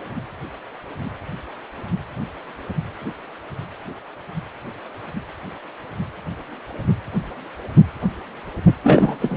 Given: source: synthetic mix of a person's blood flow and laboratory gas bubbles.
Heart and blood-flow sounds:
Doppler ultrasound of blood flow; precordium
8.83-9.16 s: bubbles
9.20-9.37 s: bubbles
From the record:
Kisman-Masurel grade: 213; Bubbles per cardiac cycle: several, 3 to 8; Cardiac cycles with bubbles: 1 to 10%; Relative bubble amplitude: loud (0.450 to 0.775); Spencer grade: 1 (occasional bubble signal discernible with the cardiac motion signal, with majority of cardiac periods free of bubbles); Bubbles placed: anywhere in the cardiac cycle

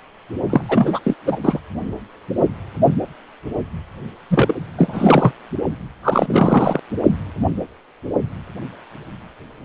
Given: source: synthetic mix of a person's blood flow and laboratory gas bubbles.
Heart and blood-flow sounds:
Doppler ultrasound of blood flow; precordium
0.49-0.61 s: bubbles
0.68-0.99 s: bubbles
1.04-1.14 s: bubbles
1.25-1.39 s: bubbles
1.43-1.59 s: bubbles
4.30-4.54 s: bubbles
4.78-5.31 s: bubbles
6.03-6.79 s: bubbles
From the record:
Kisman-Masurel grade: 333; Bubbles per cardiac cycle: rolling drumbeat, 9 or more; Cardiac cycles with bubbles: 50 to 99%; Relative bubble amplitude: loud (0.450 to 0.775); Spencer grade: 3 (all of the cardiac periods contain showers or single bubble signals, but not dominating or overriding the cardiac motion signals); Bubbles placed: only in the low amplitude regions of the cardiac cycle

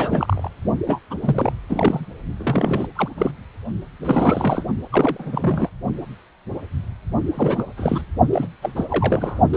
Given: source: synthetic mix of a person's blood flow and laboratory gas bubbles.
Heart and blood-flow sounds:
Doppler ultrasound of blood flow; precordium
0.00-0.49 s: bubbles
0.86-1.01 s: bubbles
1.10-1.15 s: bubbles
1.23-1.52 s: bubbles
1.69-2.06 s: bubbles
2.37-2.88 s: bubbles
2.96-3.08 s: bubbles
3.17-3.31 s: bubbles
4.02-4.64 s: bubbles
4.92-5.69 s: bubbles
7.34-7.63 s: bubbles
7.77-8.04 s: bubbles
8.33-8.48 s: bubbles
8.62-8.86 s: bubbles
8.90-9.39 s: bubbles
9.53-9.57 s: bubbles
From the record:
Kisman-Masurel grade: 332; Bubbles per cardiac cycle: rolling drumbeat, 9 or more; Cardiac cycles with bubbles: 50 to 99%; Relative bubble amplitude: moderate (0.250 to 0.450); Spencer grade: 3 (all of the cardiac periods contain showers or single bubble signals, but not dominating or overriding the cardiac motion signals); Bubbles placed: only in the low amplitude regions of the cardiac cycle

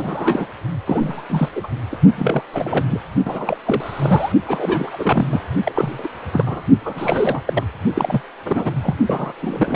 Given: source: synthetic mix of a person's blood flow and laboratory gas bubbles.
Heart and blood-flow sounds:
Doppler ultrasound of blood flow; precordium
0.00-0.45 s: bubbles
0.86-1.24 s: bubbles
1.29-1.49 s: bubbles
1.55-1.67 s: bubbles
1.92-1.97 s: bubbles
2.15-2.45 s: bubbles
2.53-2.85 s: bubbles
2.90-3.01 s: bubbles
3.25-3.57 s: bubbles
3.65-4.32 s: bubbles
4.46-5.43 s: bubbles
5.65-6.08 s: bubbles
6.33-6.64 s: bubbles
6.83-7.42 s: bubbles
7.46-7.64 s: bubbles
7.94-8.21 s: bubbles
8.45-8.74 s: bubbles
8.83-8.97 s: bubbles
9.06-9.34 s: bubbles
9.40-9.76 s: bubbles
From the record:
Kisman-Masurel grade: 342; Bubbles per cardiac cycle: rolling drumbeat, 9 or more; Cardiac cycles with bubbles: 100%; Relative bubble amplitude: moderate (0.250 to 0.450); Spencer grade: 3 (all of the cardiac periods contain showers or single bubble signals, but not dominating or overriding the cardiac motion signals); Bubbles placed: only in the low amplitude regions of the cardiac cycle

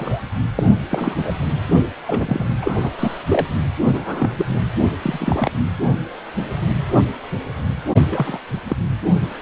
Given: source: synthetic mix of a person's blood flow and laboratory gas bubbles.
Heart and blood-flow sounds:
Doppler ultrasound of blood flow; precordium
0.00-0.22 s: bubbles
0.55-0.73 s: bubbles
0.89-1.33 s: bubbles
2.07-2.46 s: bubbles
2.61-2.90 s: bubbles
2.98-3.17 s: bubbles
3.29-3.46 s: bubbles
3.92-4.45 s: bubbles
5.02-5.51 s: bubbles
8.11-8.38 s: bubbles
8.68-8.77 s: bubbles
From the record:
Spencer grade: 3 (all of the cardiac periods contain showers or single bubble signals, but not dominating or overriding the cardiac motion signals); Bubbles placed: anywhere in the cardiac cycle

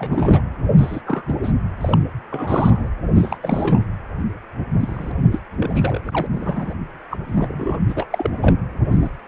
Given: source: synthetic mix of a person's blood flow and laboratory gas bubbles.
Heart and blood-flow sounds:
Doppler ultrasound of blood flow; precordium
0.00-0.42 s: bubbles
0.78-1.02 s: bubbles
1.05-1.23 s: bubbles
1.27-1.36 s: bubbles
1.44-1.52 s: bubbles
1.81-1.98 s: bubbles
2.31-2.89 s: bubbles
3.15-3.38 s: bubbles
3.42-3.83 s: bubbles
4.79-5.12 s: bubbles
5.32-5.39 s: bubbles
5.60-6.00 s: bubbles
6.05-6.26 s: bubbles
6.31-6.74 s: bubbles
7.10-7.17 s: bubbles
7.28-7.81 s: bubbles
7.89-8.06 s: bubbles
8.10-8.30 s: bubbles
8.41-8.55 s: bubbles
8.92-9.10 s: bubbles
From the record:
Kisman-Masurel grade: 242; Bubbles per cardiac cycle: several, 3 to 8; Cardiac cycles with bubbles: 100%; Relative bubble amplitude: moderate (0.250 to 0.450); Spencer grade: 3 (all of the cardiac periods contain showers or single bubble signals, but not dominating or overriding the cardiac motion signals); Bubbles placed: anywhere in the cardiac cycle

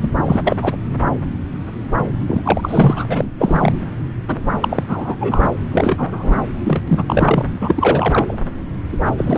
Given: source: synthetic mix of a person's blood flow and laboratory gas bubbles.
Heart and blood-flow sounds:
Doppler ultrasound of blood flow; subclavian vein
0.00-0.11 s: bubbles
0.24-0.57 s: bubbles
0.61-0.77 s: bubbles
2.27-3.06 s: bubbles
3.08-3.29 s: bubbles
3.38-3.73 s: bubbles
4.27-4.40 s: bubbles
4.60-4.83 s: bubbles
4.88-5.16 s: bubbles
5.20-5.50 s: bubbles
5.71-6.41 s: bubbles
6.63-6.82 s: bubbles
6.88-7.48 s: bubbles
7.61-8.36 s: bubbles
8.92-8.97 s: bubbles
9.04-9.13 s: bubbles
9.17-9.38 s: bubbles
From the record:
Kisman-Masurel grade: 333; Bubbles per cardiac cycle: rolling drumbeat, 9 or more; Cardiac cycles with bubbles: 50 to 99%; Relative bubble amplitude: loud (0.450 to 0.775); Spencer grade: 3 (all of the cardiac periods contain showers or single bubble signals, but not dominating or overriding the cardiac motion signals); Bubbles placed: anywhere in the cardiac cycle

